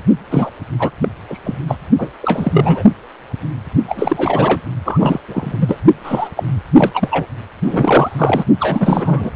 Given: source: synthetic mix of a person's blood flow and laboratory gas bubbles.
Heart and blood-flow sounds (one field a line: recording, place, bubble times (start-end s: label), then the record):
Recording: Doppler ultrasound of blood flow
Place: precordium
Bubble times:
0.30-0.50 s: bubbles
0.79-0.92 s: bubbles
1.02-1.08 s: bubbles
1.30-1.39 s: bubbles
1.44-1.58 s: bubbles
1.68-1.76 s: bubbles
1.97-2.09 s: bubbles
2.21-2.83 s: bubbles
3.88-4.61 s: bubbles
4.85-5.19 s: bubbles
5.27-5.56 s: bubbles
5.60-5.79 s: bubbles
6.04-6.29 s: bubbles
6.37-6.43 s: bubbles
6.76-6.91 s: bubbles
6.93-7.25 s: bubbles
7.64-8.45 s: bubbles
8.60-9.30 s: bubbles
From the record:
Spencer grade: 3 (all of the cardiac periods contain showers or single bubble signals, but not dominating or overriding the cardiac motion signals)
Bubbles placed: only in the low amplitude regions of the cardiac cycle